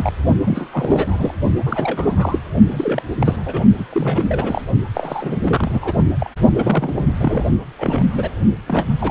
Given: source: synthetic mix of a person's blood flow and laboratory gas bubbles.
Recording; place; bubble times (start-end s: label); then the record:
Doppler ultrasound of blood flow; precordium
0.00-0.13 s: bubbles
0.45-0.71 s: bubbles
0.73-1.34 s: bubbles
1.66-2.39 s: bubbles
2.71-3.02 s: bubbles
3.20-3.64 s: bubbles
3.78-3.84 s: bubbles
3.91-4.62 s: bubbles
4.94-5.93 s: bubbles
6.20-6.30 s: bubbles
6.54-7.05 s: bubbles
7.20-7.45 s: bubbles
7.79-8.04 s: bubbles
8.11-8.29 s: bubbles
8.67-8.88 s: bubbles
9.00-9.10 s: bubbles
From the record:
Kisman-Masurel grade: 332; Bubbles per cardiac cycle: rolling drumbeat, 9 or more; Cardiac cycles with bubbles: 50 to 99%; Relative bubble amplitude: moderate (0.250 to 0.450); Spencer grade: 3 (all of the cardiac periods contain showers or single bubble signals, but not dominating or overriding the cardiac motion signals); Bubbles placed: only in the low amplitude regions of the cardiac cycle